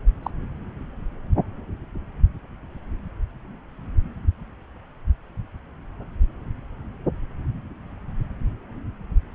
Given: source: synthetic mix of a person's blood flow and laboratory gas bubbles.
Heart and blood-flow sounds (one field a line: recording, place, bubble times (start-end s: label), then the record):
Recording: Doppler ultrasound of blood flow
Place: subclavian vein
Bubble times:
0.23-0.30 s: bubbles
From the record:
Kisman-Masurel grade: 112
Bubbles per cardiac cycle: 1 to 2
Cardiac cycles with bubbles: 1 to 10%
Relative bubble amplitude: moderate (0.250 to 0.450)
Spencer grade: 1 (occasional bubble signal discernible with the cardiac motion signal, with majority of cardiac periods free of bubbles)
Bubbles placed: anywhere in the cardiac cycle